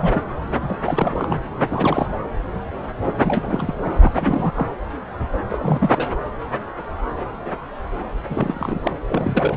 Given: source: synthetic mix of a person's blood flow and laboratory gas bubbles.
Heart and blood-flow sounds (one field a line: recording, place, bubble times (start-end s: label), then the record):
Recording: Doppler ultrasound of blood flow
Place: subclavian vein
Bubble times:
0.00-0.22 s: bubbles
0.61-0.76 s: bubbles
0.85-1.43 s: bubbles
1.54-2.16 s: bubbles
3.17-3.97 s: bubbles
4.00-4.51 s: bubbles
4.55-4.68 s: bubbles
5.49-6.15 s: bubbles
8.29-8.93 s: bubbles
9.07-9.57 s: bubbles
From the record:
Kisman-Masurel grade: 332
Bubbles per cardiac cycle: rolling drumbeat, 9 or more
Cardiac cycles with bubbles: 50 to 99%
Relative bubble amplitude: moderate (0.250 to 0.450)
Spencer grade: 3 (all of the cardiac periods contain showers or single bubble signals, but not dominating or overriding the cardiac motion signals)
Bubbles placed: anywhere in the cardiac cycle